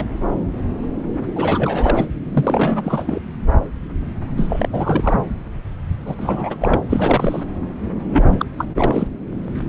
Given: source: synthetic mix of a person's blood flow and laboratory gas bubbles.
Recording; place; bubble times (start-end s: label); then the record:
Doppler ultrasound of blood flow; subclavian vein
0.00-0.05 s: bubbles
1.35-2.06 s: bubbles
2.32-3.19 s: bubbles
4.37-4.69 s: bubbles
4.73-5.20 s: bubbles
6.06-6.16 s: bubbles
6.18-6.56 s: bubbles
6.60-6.82 s: bubbles
6.90-7.44 s: bubbles
8.11-8.46 s: bubbles
8.58-8.65 s: bubbles
8.74-9.08 s: bubbles
From the record:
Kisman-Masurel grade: 332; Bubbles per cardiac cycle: rolling drumbeat, 9 or more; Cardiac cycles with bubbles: 50 to 99%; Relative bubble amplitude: moderate (0.250 to 0.450); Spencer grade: 3 (all of the cardiac periods contain showers or single bubble signals, but not dominating or overriding the cardiac motion signals); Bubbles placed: anywhere in the cardiac cycle